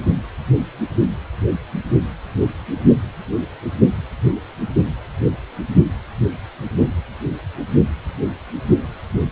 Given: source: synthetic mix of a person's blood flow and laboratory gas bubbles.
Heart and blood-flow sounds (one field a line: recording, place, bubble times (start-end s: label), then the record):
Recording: Doppler ultrasound of blood flow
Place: precordium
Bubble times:
no bubbles
From the record:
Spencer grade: 0 (complete lack of bubble signals)